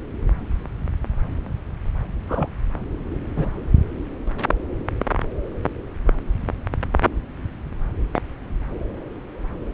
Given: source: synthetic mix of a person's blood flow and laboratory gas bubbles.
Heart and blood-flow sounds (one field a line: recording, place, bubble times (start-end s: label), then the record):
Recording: Doppler ultrasound of blood flow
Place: subclavian vein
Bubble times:
2.28-2.49 s: bubbles
3.35-3.50 s: bubbles
8.14-8.20 s: bubbles
From the record:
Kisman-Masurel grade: 122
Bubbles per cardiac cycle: 1 to 2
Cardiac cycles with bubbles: 10 to 50%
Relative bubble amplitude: moderate (0.250 to 0.450)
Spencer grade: 2 (many but less than half of the cardiac periods contain bubble signals, singularly or in groups)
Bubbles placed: anywhere in the cardiac cycle